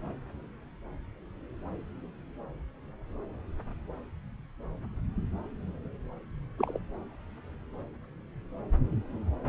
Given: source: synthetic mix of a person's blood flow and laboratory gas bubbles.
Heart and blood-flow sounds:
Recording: Doppler ultrasound of blood flow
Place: subclavian vein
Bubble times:
6.58-6.79 s: bubbles
From the record:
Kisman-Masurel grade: 111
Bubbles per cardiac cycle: 1 to 2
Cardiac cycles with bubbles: 1 to 10%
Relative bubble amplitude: barely perceptible (0.100 to 0.250)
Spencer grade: 1 (occasional bubble signal discernible with the cardiac motion signal, with majority of cardiac periods free of bubbles)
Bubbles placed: anywhere in the cardiac cycle

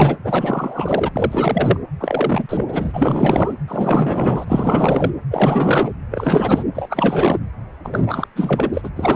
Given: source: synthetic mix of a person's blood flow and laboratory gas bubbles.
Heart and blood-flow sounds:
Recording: Doppler ultrasound of blood flow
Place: precordium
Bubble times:
0.00-0.17 s: bubbles
0.24-1.11 s: bubbles
1.15-1.77 s: bubbles
2.00-3.54 s: bubbles
3.68-5.12 s: bubbles
5.30-5.92 s: bubbles
6.10-6.63 s: bubbles
6.74-7.39 s: bubbles
7.83-8.28 s: bubbles
8.36-8.89 s: bubbles
8.96-9.16 s: bubbles
From the record:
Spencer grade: 4 (maximum detectable bubble signal sounding continuously throughout systole and diastole of every cardiac period, and overriding the amplitude of the normal cardiac signals)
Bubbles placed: anywhere in the cardiac cycle

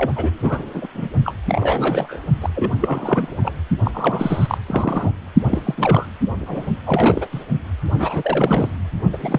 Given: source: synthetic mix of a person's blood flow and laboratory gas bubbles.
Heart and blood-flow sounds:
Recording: Doppler ultrasound of blood flow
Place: precordium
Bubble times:
0.00-0.12 s: bubbles
0.16-0.68 s: bubbles
0.74-0.88 s: bubbles
0.94-1.08 s: bubbles
1.24-1.34 s: bubbles
1.46-2.20 s: bubbles
2.41-2.50 s: bubbles
2.55-2.71 s: bubbles
2.80-3.54 s: bubbles
3.84-3.91 s: bubbles
3.93-4.58 s: bubbles
4.67-5.12 s: bubbles
5.50-5.75 s: bubbles
5.77-6.06 s: bubbles
6.39-6.67 s: bubbles
6.85-7.26 s: bubbles
7.32-7.43 s: bubbles
7.98-8.72 s: bubbles
9.12-9.16 s: bubbles
9.20-9.39 s: bubbles
From the record:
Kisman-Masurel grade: 342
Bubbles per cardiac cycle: rolling drumbeat, 9 or more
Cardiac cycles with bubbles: 100%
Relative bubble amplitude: moderate (0.250 to 0.450)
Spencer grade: 3 (all of the cardiac periods contain showers or single bubble signals, but not dominating or overriding the cardiac motion signals)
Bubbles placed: only in the low amplitude regions of the cardiac cycle

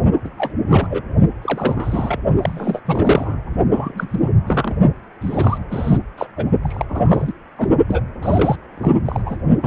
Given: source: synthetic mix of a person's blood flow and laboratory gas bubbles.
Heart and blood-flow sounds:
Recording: Doppler ultrasound of blood flow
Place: precordium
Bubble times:
0.24-0.29 s: bubbles
0.38-0.54 s: bubbles
0.68-0.88 s: bubbles
0.90-1.02 s: bubbles
1.42-2.19 s: bubbles
2.42-2.79 s: bubbles
2.85-3.40 s: bubbles
3.71-4.07 s: bubbles
4.10-4.29 s: bubbles
4.46-4.75 s: bubbles
5.21-5.58 s: bubbles
5.71-5.98 s: bubbles
6.17-6.27 s: bubbles
6.37-6.45 s: bubbles
6.63-6.84 s: bubbles
6.88-7.33 s: bubbles
7.57-7.76 s: bubbles
7.89-8.02 s: bubbles
8.23-8.56 s: bubbles
8.78-8.98 s: bubbles
9.05-9.22 s: bubbles
9.26-9.37 s: bubbles
9.62-9.67 s: bubbles
From the record:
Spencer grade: 3 (all of the cardiac periods contain showers or single bubble signals, but not dominating or overriding the cardiac motion signals)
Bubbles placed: only in the low amplitude regions of the cardiac cycle

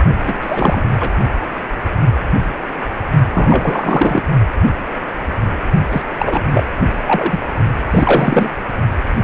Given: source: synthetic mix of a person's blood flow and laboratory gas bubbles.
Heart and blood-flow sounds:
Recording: Doppler ultrasound of blood flow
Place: precordium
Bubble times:
0.25-0.81 s: bubbles
0.99-1.09 s: bubbles
3.33-4.22 s: bubbles
5.91-6.03 s: bubbles
6.19-6.42 s: bubbles
6.53-6.64 s: bubbles
7.07-7.39 s: bubbles
7.91-8.49 s: bubbles
From the record:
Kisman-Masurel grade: 333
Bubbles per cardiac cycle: rolling drumbeat, 9 or more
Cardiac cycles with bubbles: 50 to 99%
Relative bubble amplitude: loud (0.450 to 0.775)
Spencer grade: 3 (all of the cardiac periods contain showers or single bubble signals, but not dominating or overriding the cardiac motion signals)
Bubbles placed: only in the low amplitude regions of the cardiac cycle

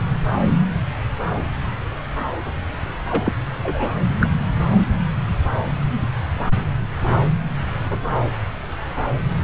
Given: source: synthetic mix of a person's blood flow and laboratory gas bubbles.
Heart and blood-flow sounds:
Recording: Doppler ultrasound of blood flow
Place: subclavian vein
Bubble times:
3.10-3.35 s: bubbles
3.63-3.92 s: bubbles
4.20-4.33 s: bubbles
From the record:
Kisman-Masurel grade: 222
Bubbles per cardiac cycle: several, 3 to 8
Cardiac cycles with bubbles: 10 to 50%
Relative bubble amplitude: moderate (0.250 to 0.450)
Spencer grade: 2 (many but less than half of the cardiac periods contain bubble signals, singularly or in groups)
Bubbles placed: anywhere in the cardiac cycle

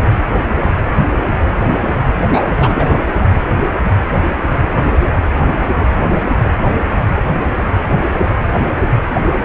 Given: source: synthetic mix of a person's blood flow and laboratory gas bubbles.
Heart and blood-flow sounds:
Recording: Doppler ultrasound of blood flow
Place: precordium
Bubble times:
2.32-3.02 s: bubbles
From the record:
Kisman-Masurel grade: 213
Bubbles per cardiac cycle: several, 3 to 8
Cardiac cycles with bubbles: 1 to 10%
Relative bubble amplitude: loud (0.450 to 0.775)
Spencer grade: 1 (occasional bubble signal discernible with the cardiac motion signal, with majority of cardiac periods free of bubbles)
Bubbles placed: anywhere in the cardiac cycle

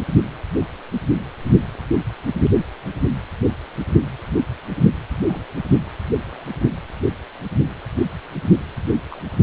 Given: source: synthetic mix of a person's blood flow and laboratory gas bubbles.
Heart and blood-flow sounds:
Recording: Doppler ultrasound of blood flow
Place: precordium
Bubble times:
5.17-5.44 s: bubbles
6.25-6.46 s: bubbles
9.10-9.19 s: bubbles
From the record:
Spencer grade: 2 (many but less than half of the cardiac periods contain bubble signals, singularly or in groups)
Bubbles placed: anywhere in the cardiac cycle

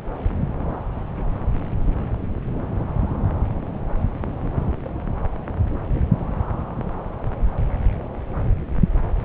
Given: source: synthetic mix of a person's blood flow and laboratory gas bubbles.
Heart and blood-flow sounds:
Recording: Doppler ultrasound of blood flow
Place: subclavian vein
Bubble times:
no bubbles
From the record:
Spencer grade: 0 (complete lack of bubble signals)

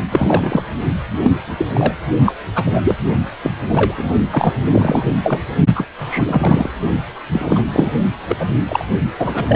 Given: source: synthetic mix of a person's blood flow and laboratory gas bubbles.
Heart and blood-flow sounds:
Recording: Doppler ultrasound of blood flow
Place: precordium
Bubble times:
0.10-0.64 s: bubbles
1.23-1.31 s: bubbles
1.57-1.66 s: bubbles
1.69-1.93 s: bubbles
2.26-2.33 s: bubbles
2.55-2.64 s: bubbles
2.66-2.97 s: bubbles
3.42-3.52 s: bubbles
3.69-3.94 s: bubbles
3.97-4.09 s: bubbles
4.32-4.56 s: bubbles
4.65-5.16 s: bubbles
5.24-5.39 s: bubbles
5.75-5.88 s: bubbles
6.00-6.70 s: bubbles
7.32-7.63 s: bubbles
7.72-7.91 s: bubbles
8.29-8.36 s: bubbles
8.39-8.60 s: bubbles
8.68-8.85 s: bubbles
9.19-9.55 s: bubbles
From the record:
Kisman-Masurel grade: 243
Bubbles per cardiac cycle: several, 3 to 8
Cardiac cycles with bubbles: 100%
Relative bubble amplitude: loud (0.450 to 0.775)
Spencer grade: 3 (all of the cardiac periods contain showers or single bubble signals, but not dominating or overriding the cardiac motion signals)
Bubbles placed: only in the low amplitude regions of the cardiac cycle

